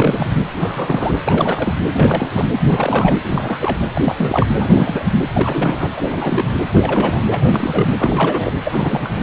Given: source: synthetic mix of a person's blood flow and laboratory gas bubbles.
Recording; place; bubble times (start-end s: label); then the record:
Doppler ultrasound of blood flow; precordium
0.00-0.26 s: bubbles
0.52-1.20 s: bubbles
1.24-1.73 s: bubbles
1.93-2.46 s: bubbles
2.53-2.58 s: bubbles
2.67-3.17 s: bubbles
3.23-3.79 s: bubbles
3.93-4.46 s: bubbles
4.58-5.05 s: bubbles
5.27-5.91 s: bubbles
5.96-6.48 s: bubbles
6.71-7.25 s: bubbles
7.30-7.92 s: bubbles
7.99-8.53 s: bubbles
8.65-9.21 s: bubbles
From the record:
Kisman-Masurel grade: 342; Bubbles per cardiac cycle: rolling drumbeat, 9 or more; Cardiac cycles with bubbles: 100%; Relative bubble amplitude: moderate (0.250 to 0.450); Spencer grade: 3 (all of the cardiac periods contain showers or single bubble signals, but not dominating or overriding the cardiac motion signals); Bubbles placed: anywhere in the cardiac cycle